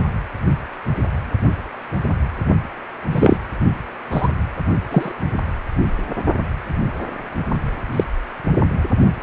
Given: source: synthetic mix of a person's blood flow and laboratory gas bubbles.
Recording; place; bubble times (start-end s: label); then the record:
Doppler ultrasound of blood flow; precordium
3.11-3.38 s: bubbles
4.10-4.29 s: bubbles
4.91-5.12 s: bubbles
7.92-8.04 s: bubbles
From the record:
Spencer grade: 2 (many but less than half of the cardiac periods contain bubble signals, singularly or in groups); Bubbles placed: only in the low amplitude regions of the cardiac cycle